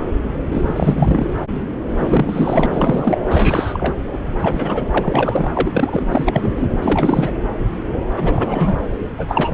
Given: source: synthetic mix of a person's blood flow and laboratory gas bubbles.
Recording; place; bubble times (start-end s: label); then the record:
Doppler ultrasound of blood flow; subclavian vein
0.51-1.27 s: bubbles
1.95-2.66 s: bubbles
2.71-3.18 s: bubbles
3.30-3.94 s: bubbles
4.12-4.19 s: bubbles
4.39-6.05 s: bubbles
6.12-6.53 s: bubbles
6.56-6.68 s: bubbles
6.82-7.31 s: bubbles
8.16-8.81 s: bubbles
9.18-9.54 s: bubbles
From the record:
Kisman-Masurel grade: 333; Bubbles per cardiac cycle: rolling drumbeat, 9 or more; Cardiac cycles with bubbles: 50 to 99%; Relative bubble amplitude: loud (0.450 to 0.775); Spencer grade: 3 (all of the cardiac periods contain showers or single bubble signals, but not dominating or overriding the cardiac motion signals); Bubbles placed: anywhere in the cardiac cycle